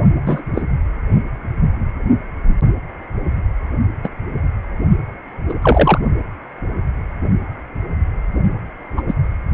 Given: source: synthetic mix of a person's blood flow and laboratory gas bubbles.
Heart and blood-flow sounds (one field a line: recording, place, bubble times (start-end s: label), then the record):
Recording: Doppler ultrasound of blood flow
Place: precordium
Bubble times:
0.26-0.42 s: bubbles
0.54-0.62 s: bubbles
4.04-4.08 s: bubbles
5.49-5.55 s: bubbles
5.62-5.99 s: bubbles
8.96-9.01 s: bubbles
9.07-9.15 s: bubbles
From the record:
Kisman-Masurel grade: 123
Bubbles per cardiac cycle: 1 to 2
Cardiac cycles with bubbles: 10 to 50%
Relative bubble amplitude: loud (0.450 to 0.775)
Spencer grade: 2 (many but less than half of the cardiac periods contain bubble signals, singularly or in groups)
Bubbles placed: only in the low amplitude regions of the cardiac cycle